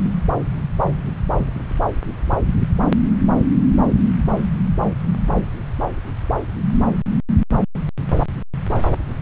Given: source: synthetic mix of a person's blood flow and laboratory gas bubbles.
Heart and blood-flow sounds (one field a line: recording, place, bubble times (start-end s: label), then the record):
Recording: Doppler ultrasound of blood flow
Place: subclavian vein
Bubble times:
no bubbles
From the record:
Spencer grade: 0 (complete lack of bubble signals)